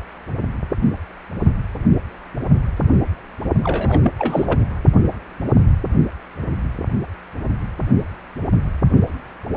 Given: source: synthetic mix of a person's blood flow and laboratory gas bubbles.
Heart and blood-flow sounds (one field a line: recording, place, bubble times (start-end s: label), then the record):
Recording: Doppler ultrasound of blood flow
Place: precordium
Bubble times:
3.63-4.00 s: bubbles
4.03-4.11 s: bubbles
4.19-4.61 s: bubbles
From the record:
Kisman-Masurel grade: 212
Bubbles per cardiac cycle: several, 3 to 8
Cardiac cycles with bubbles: 1 to 10%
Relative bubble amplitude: moderate (0.250 to 0.450)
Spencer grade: 1 (occasional bubble signal discernible with the cardiac motion signal, with majority of cardiac periods free of bubbles)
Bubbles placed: only in the low amplitude regions of the cardiac cycle